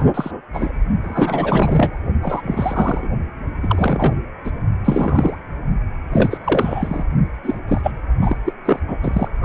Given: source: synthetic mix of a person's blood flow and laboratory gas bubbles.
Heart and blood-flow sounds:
Doppler ultrasound of blood flow; precordium
0.00-0.03 s: bubbles
0.14-0.31 s: bubbles
0.53-0.72 s: bubbles
1.02-1.99 s: bubbles
2.22-3.08 s: bubbles
3.62-4.17 s: bubbles
4.44-4.50 s: bubbles
4.85-5.37 s: bubbles
6.12-6.38 s: bubbles
6.44-7.04 s: bubbles
7.44-7.58 s: bubbles
7.68-7.91 s: bubbles
8.21-8.37 s: bubbles
8.45-8.53 s: bubbles
8.65-8.79 s: bubbles
8.88-8.96 s: bubbles
9.03-9.29 s: bubbles
9.42-9.45 s: bubbles
From the record:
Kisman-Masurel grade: 332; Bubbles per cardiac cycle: rolling drumbeat, 9 or more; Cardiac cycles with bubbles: 50 to 99%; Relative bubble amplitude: moderate (0.250 to 0.450); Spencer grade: 3 (all of the cardiac periods contain showers or single bubble signals, but not dominating or overriding the cardiac motion signals); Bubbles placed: only in the low amplitude regions of the cardiac cycle

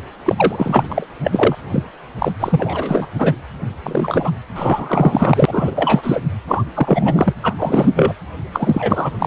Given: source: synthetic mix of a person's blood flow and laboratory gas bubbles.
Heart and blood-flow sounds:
Doppler ultrasound of blood flow; precordium
0.24-1.08 s: bubbles
1.23-1.56 s: bubbles
1.69-1.83 s: bubbles
2.19-2.32 s: bubbles
2.39-3.06 s: bubbles
3.19-3.35 s: bubbles
3.83-4.31 s: bubbles
4.55-6.21 s: bubbles
6.48-6.64 s: bubbles
6.75-7.33 s: bubbles
7.43-7.54 s: bubbles
7.58-7.91 s: bubbles
7.96-8.14 s: bubbles
8.54-9.16 s: bubbles
9.19-9.27 s: bubbles
From the record:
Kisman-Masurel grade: 343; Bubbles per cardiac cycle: rolling drumbeat, 9 or more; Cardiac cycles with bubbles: 100%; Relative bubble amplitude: loud (0.450 to 0.775); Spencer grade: 3 (all of the cardiac periods contain showers or single bubble signals, but not dominating or overriding the cardiac motion signals); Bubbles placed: anywhere in the cardiac cycle

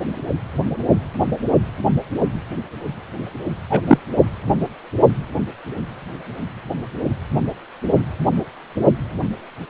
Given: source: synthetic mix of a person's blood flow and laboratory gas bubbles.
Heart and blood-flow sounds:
Doppler ultrasound of blood flow; precordium
3.70-3.81 s: bubbles
3.87-3.98 s: bubbles
From the record:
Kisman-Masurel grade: 113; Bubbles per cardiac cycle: 1 to 2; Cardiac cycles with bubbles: 1 to 10%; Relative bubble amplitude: loud (0.450 to 0.775); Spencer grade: 1 (occasional bubble signal discernible with the cardiac motion signal, with majority of cardiac periods free of bubbles); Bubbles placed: only in the low amplitude regions of the cardiac cycle

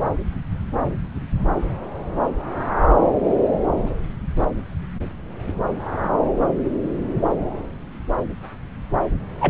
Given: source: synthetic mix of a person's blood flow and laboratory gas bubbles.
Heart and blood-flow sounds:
Doppler ultrasound of blood flow; subclavian vein
9.40-9.50 s: bubbles
From the record:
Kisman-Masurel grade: 212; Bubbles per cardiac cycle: several, 3 to 8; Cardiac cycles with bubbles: 1 to 10%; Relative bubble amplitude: moderate (0.250 to 0.450); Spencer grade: 1 (occasional bubble signal discernible with the cardiac motion signal, with majority of cardiac periods free of bubbles); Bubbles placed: anywhere in the cardiac cycle

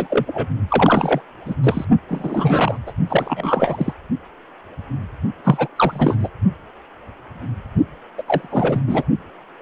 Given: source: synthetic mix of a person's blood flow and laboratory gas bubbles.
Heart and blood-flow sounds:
Doppler ultrasound of blood flow; precordium
0.00-0.47 s: bubbles
0.68-1.21 s: bubbles
1.45-1.55 s: bubbles
1.64-1.85 s: bubbles
2.08-2.77 s: bubbles
2.86-2.92 s: bubbles
3.08-3.93 s: bubbles
5.44-5.68 s: bubbles
5.76-6.17 s: bubbles
6.19-6.28 s: bubbles
8.18-8.22 s: bubbles
8.28-8.80 s: bubbles
8.87-9.04 s: bubbles
From the record:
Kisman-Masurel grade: 332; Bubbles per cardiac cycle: rolling drumbeat, 9 or more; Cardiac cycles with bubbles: 50 to 99%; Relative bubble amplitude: moderate (0.250 to 0.450); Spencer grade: 3 (all of the cardiac periods contain showers or single bubble signals, but not dominating or overriding the cardiac motion signals); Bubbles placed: only in the low amplitude regions of the cardiac cycle

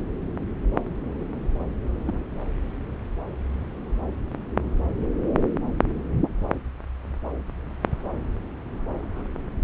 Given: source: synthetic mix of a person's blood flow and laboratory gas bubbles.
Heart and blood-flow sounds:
Doppler ultrasound of blood flow; subclavian vein
2.06-2.24 s: bubbles
From the record:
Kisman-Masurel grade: 111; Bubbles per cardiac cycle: 1 to 2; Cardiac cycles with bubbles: 1 to 10%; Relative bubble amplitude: barely perceptible (0.100 to 0.250); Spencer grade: 1 (occasional bubble signal discernible with the cardiac motion signal, with majority of cardiac periods free of bubbles); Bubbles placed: anywhere in the cardiac cycle

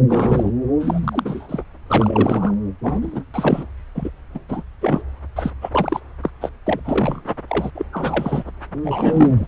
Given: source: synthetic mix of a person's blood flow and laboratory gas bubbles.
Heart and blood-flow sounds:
Doppler ultrasound of blood flow; subclavian vein
0.09-0.51 s: bubbles
0.80-1.63 s: bubbles
1.88-2.54 s: bubbles
2.83-3.22 s: bubbles
3.34-3.66 s: bubbles
3.95-4.11 s: bubbles
4.34-4.39 s: bubbles
4.49-4.62 s: bubbles
4.81-5.03 s: bubbles
5.36-5.50 s: bubbles
5.61-6.00 s: bubbles
6.22-6.30 s: bubbles
6.41-6.49 s: bubbles
6.67-6.80 s: bubbles
6.84-7.21 s: bubbles
7.47-7.71 s: bubbles
7.75-7.86 s: bubbles
7.93-8.43 s: bubbles
8.82-9.46 s: bubbles
From the record:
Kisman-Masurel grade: 342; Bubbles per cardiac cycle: rolling drumbeat, 9 or more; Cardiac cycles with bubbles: 100%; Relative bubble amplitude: moderate (0.250 to 0.450); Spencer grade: 3 (all of the cardiac periods contain showers or single bubble signals, but not dominating or overriding the cardiac motion signals); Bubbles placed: anywhere in the cardiac cycle

